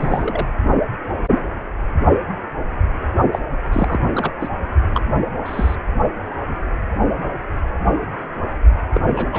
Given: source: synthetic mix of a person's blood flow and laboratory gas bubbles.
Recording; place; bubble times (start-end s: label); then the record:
Doppler ultrasound of blood flow; precordium
0.00-0.47 s: bubbles
3.31-3.39 s: bubbles
3.73-3.99 s: bubbles
4.14-4.32 s: bubbles
4.41-4.49 s: bubbles
4.93-5.02 s: bubbles
5.46-5.75 s: bubbles
8.93-9.00 s: bubbles
9.10-9.29 s: bubbles
9.32-9.39 s: bubbles
From the record:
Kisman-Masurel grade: 222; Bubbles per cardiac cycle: several, 3 to 8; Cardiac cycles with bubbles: 10 to 50%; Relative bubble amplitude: moderate (0.250 to 0.450); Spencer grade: 2 (many but less than half of the cardiac periods contain bubble signals, singularly or in groups); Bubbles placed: only in the low amplitude regions of the cardiac cycle